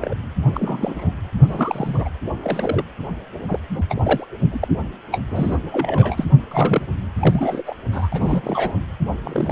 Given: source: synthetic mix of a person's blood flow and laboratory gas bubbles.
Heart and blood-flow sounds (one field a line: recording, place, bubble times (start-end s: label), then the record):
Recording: Doppler ultrasound of blood flow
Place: precordium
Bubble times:
0.00-0.14 s: bubbles
0.40-1.12 s: bubbles
1.40-2.10 s: bubbles
2.42-2.84 s: bubbles
3.48-3.58 s: bubbles
3.77-3.83 s: bubbles
3.89-4.26 s: bubbles
4.52-4.68 s: bubbles
5.11-5.20 s: bubbles
5.31-5.56 s: bubbles
5.72-6.26 s: bubbles
6.51-6.86 s: bubbles
7.18-7.62 s: bubbles
7.66-7.75 s: bubbles
7.93-8.09 s: bubbles
8.12-8.75 s: bubbles
9.24-9.52 s: bubbles
From the record:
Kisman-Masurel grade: 242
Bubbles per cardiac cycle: several, 3 to 8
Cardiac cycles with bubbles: 100%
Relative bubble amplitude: moderate (0.250 to 0.450)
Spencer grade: 3 (all of the cardiac periods contain showers or single bubble signals, but not dominating or overriding the cardiac motion signals)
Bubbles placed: anywhere in the cardiac cycle